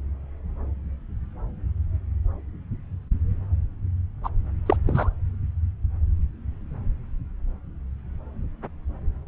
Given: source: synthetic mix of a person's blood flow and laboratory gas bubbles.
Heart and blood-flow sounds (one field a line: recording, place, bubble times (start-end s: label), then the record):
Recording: Doppler ultrasound of blood flow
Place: subclavian vein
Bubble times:
4.23-4.29 s: bubbles
4.66-4.76 s: bubbles
4.87-5.09 s: bubbles
From the record:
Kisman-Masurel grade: 212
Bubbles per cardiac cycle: several, 3 to 8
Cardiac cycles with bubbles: 1 to 10%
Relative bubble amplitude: moderate (0.250 to 0.450)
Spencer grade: 1 (occasional bubble signal discernible with the cardiac motion signal, with majority of cardiac periods free of bubbles)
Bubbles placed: anywhere in the cardiac cycle